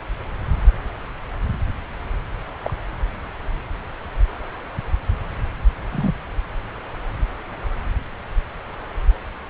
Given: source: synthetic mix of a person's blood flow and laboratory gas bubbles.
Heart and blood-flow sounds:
Doppler ultrasound of blood flow; subclavian vein
2.62-2.73 s: bubbles
5.92-6.14 s: bubbles
From the record:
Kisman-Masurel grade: 121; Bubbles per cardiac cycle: 1 to 2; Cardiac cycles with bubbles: 10 to 50%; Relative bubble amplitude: barely perceptible (0.100 to 0.250); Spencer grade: 2 (many but less than half of the cardiac periods contain bubble signals, singularly or in groups); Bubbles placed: anywhere in the cardiac cycle

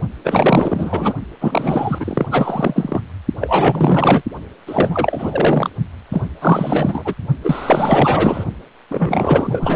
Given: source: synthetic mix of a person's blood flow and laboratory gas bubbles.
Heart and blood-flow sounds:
Doppler ultrasound of blood flow; precordium
0.24-1.14 s: bubbles
1.41-2.26 s: bubbles
2.31-3.02 s: bubbles
3.41-4.21 s: bubbles
4.67-5.70 s: bubbles
6.11-6.28 s: bubbles
6.41-7.14 s: bubbles
7.44-8.45 s: bubbles
8.90-9.76 s: bubbles
From the record:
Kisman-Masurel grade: 444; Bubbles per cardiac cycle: continuous sound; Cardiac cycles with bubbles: 100%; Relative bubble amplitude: maximal (0.775 to 0.999); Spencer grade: 4 (maximum detectable bubble signal sounding continuously throughout systole and diastole of every cardiac period, and overriding the amplitude of the normal cardiac signals); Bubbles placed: only in the low amplitude regions of the cardiac cycle

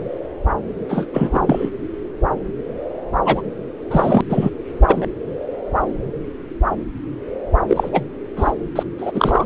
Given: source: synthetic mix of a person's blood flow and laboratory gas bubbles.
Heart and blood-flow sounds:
Doppler ultrasound of blood flow; subclavian vein
0.89-1.05 s: bubbles
1.14-1.70 s: bubbles
3.25-3.42 s: bubbles
3.90-4.21 s: bubbles
4.29-4.50 s: bubbles
4.88-5.07 s: bubbles
7.68-7.89 s: bubbles
7.92-8.02 s: bubbles
8.36-8.52 s: bubbles
8.75-8.83 s: bubbles
8.97-9.11 s: bubbles
9.14-9.45 s: bubbles
From the record:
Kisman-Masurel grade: 233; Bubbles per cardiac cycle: several, 3 to 8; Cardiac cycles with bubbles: 50 to 99%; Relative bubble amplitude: loud (0.450 to 0.775); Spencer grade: 3 (all of the cardiac periods contain showers or single bubble signals, but not dominating or overriding the cardiac motion signals); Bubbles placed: anywhere in the cardiac cycle

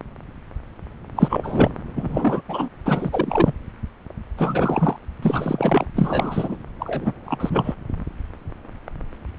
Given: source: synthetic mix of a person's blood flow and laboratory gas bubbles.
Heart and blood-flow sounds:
Doppler ultrasound of blood flow; subclavian vein
1.16-1.71 s: bubbles
1.96-2.42 s: bubbles
2.48-2.69 s: bubbles
2.85-3.53 s: bubbles
4.37-4.96 s: bubbles
5.22-5.87 s: bubbles
5.95-6.56 s: bubbles
6.79-7.12 s: bubbles
7.25-7.74 s: bubbles
From the record:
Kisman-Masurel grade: 333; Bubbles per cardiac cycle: rolling drumbeat, 9 or more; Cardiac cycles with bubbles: 50 to 99%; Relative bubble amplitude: loud (0.450 to 0.775); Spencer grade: 3 (all of the cardiac periods contain showers or single bubble signals, but not dominating or overriding the cardiac motion signals); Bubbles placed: anywhere in the cardiac cycle

